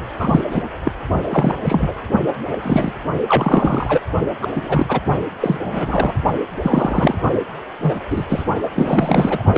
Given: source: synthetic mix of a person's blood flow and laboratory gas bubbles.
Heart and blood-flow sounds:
Doppler ultrasound of blood flow; precordium
0.16-0.45 s: bubbles
0.51-0.62 s: bubbles
0.84-0.92 s: bubbles
1.30-1.55 s: bubbles
1.65-1.93 s: bubbles
2.50-2.60 s: bubbles
2.62-2.93 s: bubbles
3.28-4.00 s: bubbles
4.42-4.47 s: bubbles
4.54-5.00 s: bubbles
5.40-5.58 s: bubbles
5.64-6.13 s: bubbles
6.62-7.15 s: bubbles
7.82-8.00 s: bubbles
8.10-8.25 s: bubbles
8.29-8.44 s: bubbles
8.62-8.71 s: bubbles
8.75-9.44 s: bubbles
9.54-9.58 s: bubbles
From the record:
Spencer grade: 3 (all of the cardiac periods contain showers or single bubble signals, but not dominating or overriding the cardiac motion signals); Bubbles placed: only in the low amplitude regions of the cardiac cycle

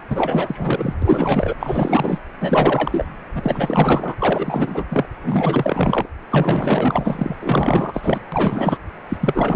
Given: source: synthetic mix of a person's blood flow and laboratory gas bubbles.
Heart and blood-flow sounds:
Doppler ultrasound of blood flow; precordium
0.09-0.94 s: bubbles
1.02-1.54 s: bubbles
1.59-2.20 s: bubbles
2.40-3.06 s: bubbles
3.35-4.15 s: bubbles
4.19-4.83 s: bubbles
4.89-5.08 s: bubbles
5.23-6.09 s: bubbles
6.30-8.20 s: bubbles
8.32-8.79 s: bubbles
9.09-9.17 s: bubbles
9.21-9.56 s: bubbles
From the record:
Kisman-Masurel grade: 444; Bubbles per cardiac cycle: continuous sound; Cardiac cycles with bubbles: 100%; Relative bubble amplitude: maximal (0.775 to 0.999); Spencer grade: 4 (maximum detectable bubble signal sounding continuously throughout systole and diastole of every cardiac period, and overriding the amplitude of the normal cardiac signals); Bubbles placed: anywhere in the cardiac cycle

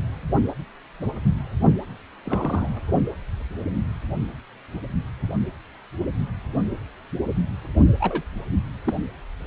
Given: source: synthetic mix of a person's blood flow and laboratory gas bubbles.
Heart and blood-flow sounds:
Doppler ultrasound of blood flow; precordium
2.24-2.69 s: bubbles
8.00-8.21 s: bubbles
8.84-8.95 s: bubbles
From the record:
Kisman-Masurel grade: 121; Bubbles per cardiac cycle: 1 to 2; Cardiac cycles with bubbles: 10 to 50%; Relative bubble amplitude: barely perceptible (0.100 to 0.250); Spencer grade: 2 (many but less than half of the cardiac periods contain bubble signals, singularly or in groups); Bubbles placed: only in the low amplitude regions of the cardiac cycle

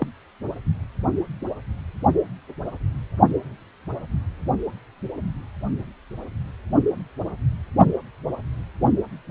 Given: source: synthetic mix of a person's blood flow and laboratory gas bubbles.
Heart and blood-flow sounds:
Doppler ultrasound of blood flow; precordium
0.00-0.07 s: bubbles
From the record:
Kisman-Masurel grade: 123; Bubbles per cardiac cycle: 1 to 2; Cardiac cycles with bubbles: 10 to 50%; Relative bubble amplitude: loud (0.450 to 0.775); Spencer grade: 2 (many but less than half of the cardiac periods contain bubble signals, singularly or in groups); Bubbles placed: only in the low amplitude regions of the cardiac cycle

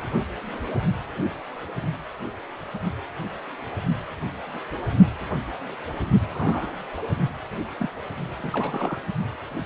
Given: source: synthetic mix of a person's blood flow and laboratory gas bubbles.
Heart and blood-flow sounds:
Doppler ultrasound of blood flow; precordium
6.29-6.70 s: bubbles
6.97-7.03 s: bubbles
7.79-7.89 s: bubbles
8.39-9.01 s: bubbles
From the record:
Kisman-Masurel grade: 221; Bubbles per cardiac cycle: several, 3 to 8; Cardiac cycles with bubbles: 10 to 50%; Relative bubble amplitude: barely perceptible (0.100 to 0.250); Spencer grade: 2 (many but less than half of the cardiac periods contain bubble signals, singularly or in groups); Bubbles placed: only in the low amplitude regions of the cardiac cycle

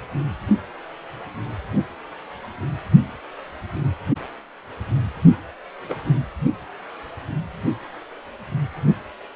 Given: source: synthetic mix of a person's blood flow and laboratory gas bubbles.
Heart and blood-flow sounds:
Doppler ultrasound of blood flow; precordium
5.88-5.96 s: bubbles
From the record:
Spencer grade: 1 (occasional bubble signal discernible with the cardiac motion signal, with majority of cardiac periods free of bubbles); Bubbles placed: anywhere in the cardiac cycle

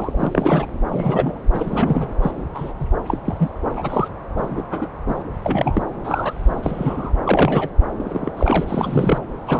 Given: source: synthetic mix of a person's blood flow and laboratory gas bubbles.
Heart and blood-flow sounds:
Doppler ultrasound of blood flow; subclavian vein
0.00-0.67 s: bubbles
0.88-1.42 s: bubbles
1.52-2.07 s: bubbles
2.21-2.31 s: bubbles
2.54-2.73 s: bubbles
2.79-2.87 s: bubbles
3.06-3.18 s: bubbles
3.24-3.50 s: bubbles
3.75-4.08 s: bubbles
4.37-4.62 s: bubbles
4.71-4.90 s: bubbles
5.07-5.24 s: bubbles
5.44-5.83 s: bubbles
6.04-7.12 s: bubbles
7.25-7.69 s: bubbles
7.98-8.31 s: bubbles
8.37-9.21 s: bubbles
9.46-9.60 s: bubbles
From the record:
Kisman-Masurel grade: 242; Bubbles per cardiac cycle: several, 3 to 8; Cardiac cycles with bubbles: 100%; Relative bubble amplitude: moderate (0.250 to 0.450); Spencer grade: 3 (all of the cardiac periods contain showers or single bubble signals, but not dominating or overriding the cardiac motion signals); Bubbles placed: anywhere in the cardiac cycle

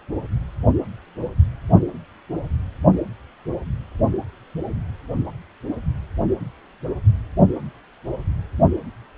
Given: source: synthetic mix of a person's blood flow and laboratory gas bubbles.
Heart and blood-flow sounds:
Doppler ultrasound of blood flow; precordium
no bubbles
From the record:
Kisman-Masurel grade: 000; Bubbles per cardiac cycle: 0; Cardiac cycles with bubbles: 0%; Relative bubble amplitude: no bubbles discernible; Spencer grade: 0 (complete lack of bubble signals)

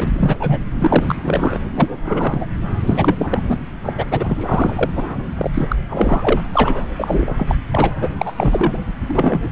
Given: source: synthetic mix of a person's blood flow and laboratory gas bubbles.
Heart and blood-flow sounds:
Doppler ultrasound of blood flow; subclavian vein
0.00-0.60 s: bubbles
0.75-1.16 s: bubbles
1.24-1.58 s: bubbles
1.75-1.96 s: bubbles
2.06-2.46 s: bubbles
2.86-3.15 s: bubbles
3.18-3.28 s: bubbles
3.31-3.43 s: bubbles
3.48-3.58 s: bubbles
3.84-3.93 s: bubbles
3.98-4.05 s: bubbles
4.10-4.90 s: bubbles
4.92-5.03 s: bubbles
5.38-5.50 s: bubbles
5.54-5.76 s: bubbles
5.89-6.41 s: bubbles
6.53-6.82 s: bubbles
6.96-7.55 s: bubbles
7.70-7.91 s: bubbles
8.01-8.09 s: bubbles
8.19-8.32 s: bubbles
8.36-8.77 s: bubbles
9.09-9.48 s: bubbles
From the record:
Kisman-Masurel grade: 343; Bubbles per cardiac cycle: rolling drumbeat, 9 or more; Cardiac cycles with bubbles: 100%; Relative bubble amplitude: loud (0.450 to 0.775); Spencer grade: 3 (all of the cardiac periods contain showers or single bubble signals, but not dominating or overriding the cardiac motion signals); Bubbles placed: anywhere in the cardiac cycle

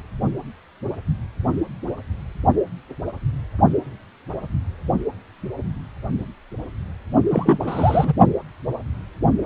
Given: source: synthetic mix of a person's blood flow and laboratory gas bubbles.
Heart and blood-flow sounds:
Doppler ultrasound of blood flow; precordium
7.31-8.13 s: bubbles
From the record:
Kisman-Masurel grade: 212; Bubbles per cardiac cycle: several, 3 to 8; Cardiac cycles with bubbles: 1 to 10%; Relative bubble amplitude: moderate (0.250 to 0.450); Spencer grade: 1 (occasional bubble signal discernible with the cardiac motion signal, with majority of cardiac periods free of bubbles); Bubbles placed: only in the low amplitude regions of the cardiac cycle

